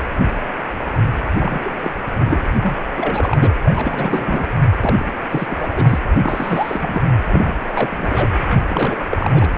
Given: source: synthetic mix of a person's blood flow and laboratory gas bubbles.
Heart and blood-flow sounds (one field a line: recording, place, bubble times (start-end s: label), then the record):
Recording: Doppler ultrasound of blood flow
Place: precordium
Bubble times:
0.00-0.04 s: bubbles
1.40-1.73 s: bubbles
1.84-1.91 s: bubbles
2.18-2.48 s: bubbles
2.62-2.79 s: bubbles
2.96-3.38 s: bubbles
3.41-3.53 s: bubbles
3.64-4.47 s: bubbles
4.82-4.96 s: bubbles
4.99-5.12 s: bubbles
5.31-5.99 s: bubbles
6.22-7.03 s: bubbles
7.30-7.58 s: bubbles
7.68-8.29 s: bubbles
8.47-8.55 s: bubbles
8.68-8.97 s: bubbles
9.09-9.30 s: bubbles
9.34-9.48 s: bubbles
From the record:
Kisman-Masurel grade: 332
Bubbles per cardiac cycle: rolling drumbeat, 9 or more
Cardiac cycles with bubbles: 50 to 99%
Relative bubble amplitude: moderate (0.250 to 0.450)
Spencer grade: 3 (all of the cardiac periods contain showers or single bubble signals, but not dominating or overriding the cardiac motion signals)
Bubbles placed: anywhere in the cardiac cycle